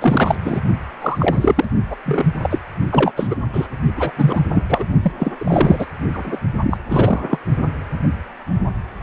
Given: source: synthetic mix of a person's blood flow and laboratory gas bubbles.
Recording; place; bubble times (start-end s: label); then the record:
Doppler ultrasound of blood flow; precordium
0.00-0.35 s: bubbles
0.44-0.60 s: bubbles
1.01-1.65 s: bubbles
1.90-1.96 s: bubbles
2.06-2.25 s: bubbles
2.37-2.61 s: bubbles
2.90-3.14 s: bubbles
3.16-3.35 s: bubbles
3.52-3.66 s: bubbles
3.97-4.12 s: bubbles
4.17-4.41 s: bubbles
4.54-4.63 s: bubbles
4.69-4.85 s: bubbles
5.02-5.12 s: bubbles
5.19-5.32 s: bubbles
5.39-5.87 s: bubbles
6.13-6.38 s: bubbles
6.62-6.79 s: bubbles
6.85-7.38 s: bubbles
From the record:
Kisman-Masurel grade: 333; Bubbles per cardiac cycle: rolling drumbeat, 9 or more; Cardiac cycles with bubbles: 50 to 99%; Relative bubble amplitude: loud (0.450 to 0.775); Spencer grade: 3 (all of the cardiac periods contain showers or single bubble signals, but not dominating or overriding the cardiac motion signals); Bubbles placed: only in the low amplitude regions of the cardiac cycle